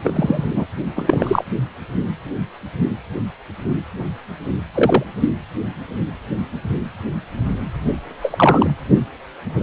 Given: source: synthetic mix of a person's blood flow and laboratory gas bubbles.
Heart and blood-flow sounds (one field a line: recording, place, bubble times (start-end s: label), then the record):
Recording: Doppler ultrasound of blood flow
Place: precordium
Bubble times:
0.04-0.43 s: bubbles
0.51-0.66 s: bubbles
0.95-1.45 s: bubbles
4.74-5.04 s: bubbles
5.20-5.29 s: bubbles
8.22-8.70 s: bubbles
From the record:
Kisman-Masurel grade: 233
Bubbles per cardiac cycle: several, 3 to 8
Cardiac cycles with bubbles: 50 to 99%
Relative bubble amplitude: loud (0.450 to 0.775)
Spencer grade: 3 (all of the cardiac periods contain showers or single bubble signals, but not dominating or overriding the cardiac motion signals)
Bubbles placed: anywhere in the cardiac cycle